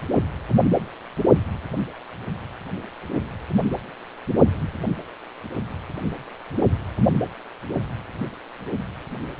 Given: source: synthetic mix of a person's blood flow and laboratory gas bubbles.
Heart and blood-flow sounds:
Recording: Doppler ultrasound of blood flow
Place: precordium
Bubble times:
no bubbles
From the record:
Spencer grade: 0 (complete lack of bubble signals)

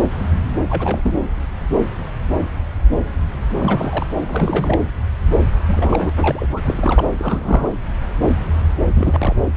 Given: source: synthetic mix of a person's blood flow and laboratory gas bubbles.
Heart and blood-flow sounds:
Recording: Doppler ultrasound of blood flow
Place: subclavian vein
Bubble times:
0.00-0.04 s: bubbles
0.68-1.19 s: bubbles
3.60-4.07 s: bubbles
4.26-4.82 s: bubbles
5.68-6.10 s: bubbles
6.18-6.47 s: bubbles
6.51-6.61 s: bubbles
6.65-7.04 s: bubbles
7.19-7.69 s: bubbles
8.93-9.34 s: bubbles
From the record:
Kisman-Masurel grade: 332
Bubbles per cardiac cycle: rolling drumbeat, 9 or more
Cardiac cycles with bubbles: 50 to 99%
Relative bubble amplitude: moderate (0.250 to 0.450)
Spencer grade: 3 (all of the cardiac periods contain showers or single bubble signals, but not dominating or overriding the cardiac motion signals)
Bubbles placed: anywhere in the cardiac cycle

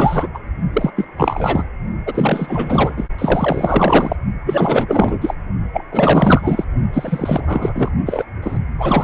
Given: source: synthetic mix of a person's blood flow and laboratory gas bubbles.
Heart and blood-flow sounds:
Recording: Doppler ultrasound of blood flow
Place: precordium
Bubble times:
0.00-0.29 s: bubbles
0.34-0.39 s: bubbles
0.73-0.91 s: bubbles
0.96-1.06 s: bubbles
1.17-1.66 s: bubbles
2.05-3.08 s: bubbles
3.18-4.16 s: bubbles
4.45-5.35 s: bubbles
5.73-5.85 s: bubbles
5.92-6.64 s: bubbles
6.92-7.90 s: bubbles
8.05-8.25 s: bubbles
8.42-8.57 s: bubbles
8.78-9.04 s: bubbles
From the record:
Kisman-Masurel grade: 444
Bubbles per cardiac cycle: continuous sound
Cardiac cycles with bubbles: 100%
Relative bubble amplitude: maximal (0.775 to 0.999)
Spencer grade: 4 (maximum detectable bubble signal sounding continuously throughout systole and diastole of every cardiac period, and overriding the amplitude of the normal cardiac signals)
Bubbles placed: only in the low amplitude regions of the cardiac cycle

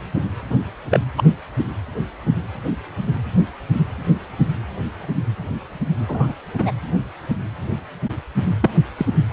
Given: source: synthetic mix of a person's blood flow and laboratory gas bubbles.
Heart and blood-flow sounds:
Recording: Doppler ultrasound of blood flow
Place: precordium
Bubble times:
0.49-0.55 s: bubbles
0.91-1.00 s: bubbles
1.17-1.23 s: bubbles
1.27-1.33 s: bubbles
6.09-6.32 s: bubbles
6.58-6.71 s: bubbles
8.61-8.71 s: bubbles
8.98-9.05 s: bubbles
From the record:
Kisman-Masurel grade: 122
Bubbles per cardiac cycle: 1 to 2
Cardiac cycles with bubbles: 10 to 50%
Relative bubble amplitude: moderate (0.250 to 0.450)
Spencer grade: 2 (many but less than half of the cardiac periods contain bubble signals, singularly or in groups)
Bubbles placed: anywhere in the cardiac cycle

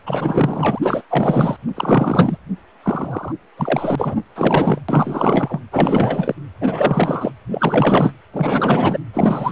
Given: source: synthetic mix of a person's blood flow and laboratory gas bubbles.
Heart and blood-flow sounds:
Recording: Doppler ultrasound of blood flow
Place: precordium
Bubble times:
0.06-0.79 s: bubbles
0.82-1.01 s: bubbles
1.09-1.56 s: bubbles
1.75-2.38 s: bubbles
2.83-3.32 s: bubbles
3.57-4.17 s: bubbles
4.35-4.79 s: bubbles
4.88-5.59 s: bubbles
5.72-6.35 s: bubbles
6.61-7.32 s: bubbles
7.50-8.12 s: bubbles
8.33-9.01 s: bubbles
9.13-9.51 s: bubbles
From the record:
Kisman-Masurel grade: 444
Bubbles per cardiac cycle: continuous sound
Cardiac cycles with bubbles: 100%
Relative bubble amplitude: maximal (0.775 to 0.999)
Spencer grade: 4 (maximum detectable bubble signal sounding continuously throughout systole and diastole of every cardiac period, and overriding the amplitude of the normal cardiac signals)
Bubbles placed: anywhere in the cardiac cycle

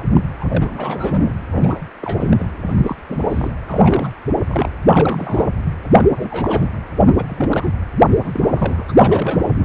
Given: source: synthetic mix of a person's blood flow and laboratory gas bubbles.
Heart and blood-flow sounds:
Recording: Doppler ultrasound of blood flow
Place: precordium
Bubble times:
0.00-0.03 s: bubbles
0.15-0.21 s: bubbles
0.41-0.45 s: bubbles
0.49-1.34 s: bubbles
1.51-1.84 s: bubbles
2.02-2.50 s: bubbles
2.67-2.96 s: bubbles
3.08-3.51 s: bubbles
3.67-4.13 s: bubbles
4.46-4.71 s: bubbles
4.85-5.49 s: bubbles
5.84-6.68 s: bubbles
7.06-7.14 s: bubbles
7.17-7.74 s: bubbles
7.98-8.16 s: bubbles
8.24-8.83 s: bubbles
8.88-8.92 s: bubbles
8.98-9.51 s: bubbles
9.56-9.65 s: bubbles
From the record:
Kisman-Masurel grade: 342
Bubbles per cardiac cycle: rolling drumbeat, 9 or more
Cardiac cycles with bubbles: 100%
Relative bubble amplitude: moderate (0.250 to 0.450)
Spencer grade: 3 (all of the cardiac periods contain showers or single bubble signals, but not dominating or overriding the cardiac motion signals)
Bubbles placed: anywhere in the cardiac cycle

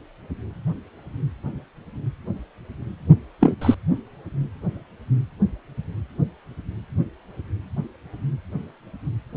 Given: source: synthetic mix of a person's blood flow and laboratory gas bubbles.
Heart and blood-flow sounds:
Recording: Doppler ultrasound of blood flow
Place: precordium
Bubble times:
3.41-3.54 s: bubbles
3.61-3.75 s: bubbles
From the record:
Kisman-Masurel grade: 113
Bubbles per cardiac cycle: 1 to 2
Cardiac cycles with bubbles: 1 to 10%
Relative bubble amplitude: loud (0.450 to 0.775)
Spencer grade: 1 (occasional bubble signal discernible with the cardiac motion signal, with majority of cardiac periods free of bubbles)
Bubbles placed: anywhere in the cardiac cycle

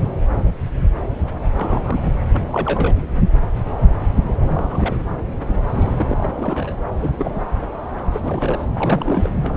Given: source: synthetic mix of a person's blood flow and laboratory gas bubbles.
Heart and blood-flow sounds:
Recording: Doppler ultrasound of blood flow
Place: subclavian vein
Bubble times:
1.56-2.00 s: bubbles
2.05-2.10 s: bubbles
2.31-3.02 s: bubbles
4.45-4.98 s: bubbles
5.68-6.30 s: bubbles
6.34-6.74 s: bubbles
6.88-6.93 s: bubbles
7.00-7.31 s: bubbles
7.35-7.39 s: bubbles
8.12-8.21 s: bubbles
8.23-8.66 s: bubbles
8.74-9.29 s: bubbles
9.42-9.57 s: bubbles
From the record:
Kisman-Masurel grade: 232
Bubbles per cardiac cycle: several, 3 to 8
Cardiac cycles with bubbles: 50 to 99%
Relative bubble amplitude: moderate (0.250 to 0.450)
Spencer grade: 3 (all of the cardiac periods contain showers or single bubble signals, but not dominating or overriding the cardiac motion signals)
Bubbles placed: anywhere in the cardiac cycle

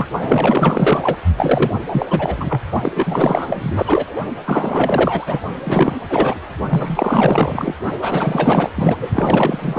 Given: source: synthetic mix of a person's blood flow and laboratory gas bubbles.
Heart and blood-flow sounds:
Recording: Doppler ultrasound of blood flow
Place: precordium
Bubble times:
0.00-0.07 s: bubbles
0.20-1.17 s: bubbles
1.37-1.72 s: bubbles
1.92-2.06 s: bubbles
2.10-2.61 s: bubbles
2.83-4.15 s: bubbles
4.46-5.40 s: bubbles
5.65-5.96 s: bubbles
6.10-6.40 s: bubbles
6.70-7.75 s: bubbles
8.02-8.70 s: bubbles
8.76-9.09 s: bubbles
9.12-9.79 s: bubbles
From the record:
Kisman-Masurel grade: 444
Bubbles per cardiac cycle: continuous sound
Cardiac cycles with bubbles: 100%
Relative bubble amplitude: maximal (0.775 to 0.999)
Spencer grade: 4 (maximum detectable bubble signal sounding continuously throughout systole and diastole of every cardiac period, and overriding the amplitude of the normal cardiac signals)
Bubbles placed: only in the low amplitude regions of the cardiac cycle

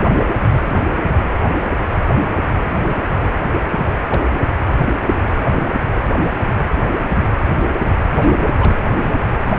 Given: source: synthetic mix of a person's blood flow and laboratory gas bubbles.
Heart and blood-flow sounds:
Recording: Doppler ultrasound of blood flow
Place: precordium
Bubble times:
0.00-0.15 s: bubbles
3.83-3.94 s: bubbles
4.07-4.34 s: bubbles
4.38-4.46 s: bubbles
8.21-8.30 s: bubbles
8.51-8.76 s: bubbles
From the record:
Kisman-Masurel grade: 221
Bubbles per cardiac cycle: several, 3 to 8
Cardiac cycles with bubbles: 10 to 50%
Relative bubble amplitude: barely perceptible (0.100 to 0.250)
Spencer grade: 2 (many but less than half of the cardiac periods contain bubble signals, singularly or in groups)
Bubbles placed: anywhere in the cardiac cycle

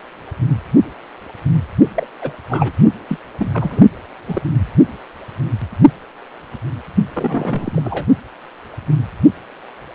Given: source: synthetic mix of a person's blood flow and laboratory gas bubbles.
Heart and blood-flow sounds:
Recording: Doppler ultrasound of blood flow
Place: precordium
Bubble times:
1.95-2.06 s: bubbles
2.21-2.31 s: bubbles
2.49-2.73 s: bubbles
3.08-3.18 s: bubbles
3.37-3.51 s: bubbles
3.54-3.82 s: bubbles
4.27-4.42 s: bubbles
7.13-8.05 s: bubbles
From the record:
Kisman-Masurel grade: 222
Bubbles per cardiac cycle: several, 3 to 8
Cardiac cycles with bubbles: 10 to 50%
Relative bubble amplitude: moderate (0.250 to 0.450)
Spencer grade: 2 (many but less than half of the cardiac periods contain bubble signals, singularly or in groups)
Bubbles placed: only in the low amplitude regions of the cardiac cycle

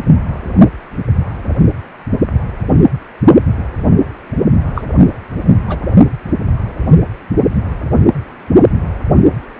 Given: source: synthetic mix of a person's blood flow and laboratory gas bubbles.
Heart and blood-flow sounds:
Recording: Doppler ultrasound of blood flow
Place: precordium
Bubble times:
4.75-4.82 s: bubbles
5.67-5.79 s: bubbles
From the record:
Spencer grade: 1 (occasional bubble signal discernible with the cardiac motion signal, with majority of cardiac periods free of bubbles)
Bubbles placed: only in the low amplitude regions of the cardiac cycle

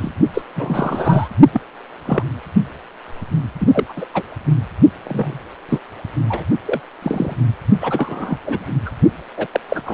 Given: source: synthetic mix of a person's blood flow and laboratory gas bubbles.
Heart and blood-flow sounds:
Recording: Doppler ultrasound of blood flow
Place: precordium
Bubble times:
0.00-0.11 s: bubbles
0.33-0.42 s: bubbles
0.55-1.28 s: bubbles
1.52-1.60 s: bubbles
2.06-2.24 s: bubbles
3.60-3.84 s: bubbles
3.89-4.06 s: bubbles
4.13-4.23 s: bubbles
5.04-5.39 s: bubbles
5.69-5.79 s: bubbles
6.29-6.45 s: bubbles
6.66-6.80 s: bubbles
7.02-7.36 s: bubbles
7.80-8.38 s: bubbles
8.46-8.68 s: bubbles
8.86-8.90 s: bubbles
9.37-9.47 s: bubbles
9.52-9.60 s: bubbles
9.69-9.82 s: bubbles
9.86-9.94 s: bubbles
From the record:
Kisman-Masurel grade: 242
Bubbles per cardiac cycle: several, 3 to 8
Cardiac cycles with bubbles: 100%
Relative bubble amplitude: moderate (0.250 to 0.450)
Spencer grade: 3 (all of the cardiac periods contain showers or single bubble signals, but not dominating or overriding the cardiac motion signals)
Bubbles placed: only in the low amplitude regions of the cardiac cycle

